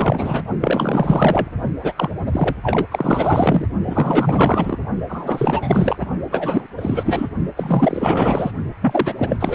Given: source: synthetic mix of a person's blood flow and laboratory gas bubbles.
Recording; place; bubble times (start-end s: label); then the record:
Doppler ultrasound of blood flow; precordium
0.00-0.41 s: bubbles
0.60-1.49 s: bubbles
1.82-2.10 s: bubbles
2.26-2.56 s: bubbles
2.62-2.86 s: bubbles
2.91-3.67 s: bubbles
3.87-4.79 s: bubbles
5.08-6.07 s: bubbles
6.31-6.67 s: bubbles
6.77-7.29 s: bubbles
7.57-8.52 s: bubbles
8.80-9.14 s: bubbles
9.17-9.37 s: bubbles
9.39-9.55 s: bubbles
From the record:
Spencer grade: 4 (maximum detectable bubble signal sounding continuously throughout systole and diastole of every cardiac period, and overriding the amplitude of the normal cardiac signals); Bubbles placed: only in the low amplitude regions of the cardiac cycle